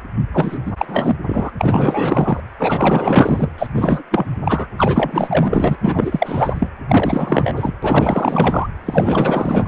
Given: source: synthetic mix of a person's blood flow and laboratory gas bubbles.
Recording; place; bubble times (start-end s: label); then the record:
Doppler ultrasound of blood flow; precordium
0.32-0.59 s: bubbles
0.66-0.72 s: bubbles
0.78-1.16 s: bubbles
1.26-1.50 s: bubbles
1.58-2.40 s: bubbles
2.59-3.50 s: bubbles
3.58-3.67 s: bubbles
3.74-4.03 s: bubbles
4.11-4.26 s: bubbles
4.44-4.67 s: bubbles
4.78-5.77 s: bubbles
5.80-6.67 s: bubbles
6.88-7.53 s: bubbles
7.56-7.73 s: bubbles
7.82-8.68 s: bubbles
8.86-9.67 s: bubbles
From the record:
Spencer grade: 4 (maximum detectable bubble signal sounding continuously throughout systole and diastole of every cardiac period, and overriding the amplitude of the normal cardiac signals); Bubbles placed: anywhere in the cardiac cycle